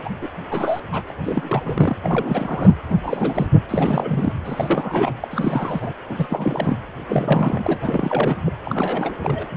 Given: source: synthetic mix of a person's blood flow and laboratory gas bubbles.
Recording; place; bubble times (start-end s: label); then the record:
Doppler ultrasound of blood flow; precordium
0.05-0.09 s: bubbles
0.21-0.29 s: bubbles
0.51-0.80 s: bubbles
0.92-1.04 s: bubbles
1.06-1.11 s: bubbles
1.23-1.96 s: bubbles
2.03-2.76 s: bubbles
2.89-2.96 s: bubbles
3.02-3.47 s: bubbles
3.69-4.33 s: bubbles
4.44-5.13 s: bubbles
5.21-5.28 s: bubbles
5.30-5.93 s: bubbles
6.09-6.77 s: bubbles
7.08-8.36 s: bubbles
8.45-8.53 s: bubbles
8.65-9.14 s: bubbles
9.22-9.46 s: bubbles
From the record:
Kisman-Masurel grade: 342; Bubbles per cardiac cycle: rolling drumbeat, 9 or more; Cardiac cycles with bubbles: 100%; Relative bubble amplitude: moderate (0.250 to 0.450); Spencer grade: 3 (all of the cardiac periods contain showers or single bubble signals, but not dominating or overriding the cardiac motion signals); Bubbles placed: anywhere in the cardiac cycle